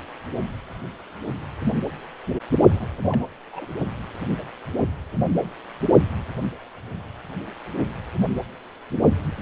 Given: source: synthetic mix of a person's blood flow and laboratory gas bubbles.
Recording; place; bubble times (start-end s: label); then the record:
Doppler ultrasound of blood flow; precordium
2.69-2.88 s: bubbles
3.01-3.26 s: bubbles
3.52-3.66 s: bubbles
From the record:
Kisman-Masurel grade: 211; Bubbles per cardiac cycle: several, 3 to 8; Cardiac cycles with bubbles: 1 to 10%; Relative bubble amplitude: barely perceptible (0.100 to 0.250); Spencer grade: 1 (occasional bubble signal discernible with the cardiac motion signal, with majority of cardiac periods free of bubbles); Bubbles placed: only in the low amplitude regions of the cardiac cycle